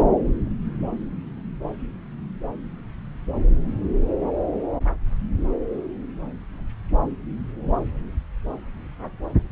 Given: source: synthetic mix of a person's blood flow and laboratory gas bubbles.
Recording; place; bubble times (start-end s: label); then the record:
Doppler ultrasound of blood flow; subclavian vein
no bubbles
From the record:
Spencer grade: 0 (complete lack of bubble signals)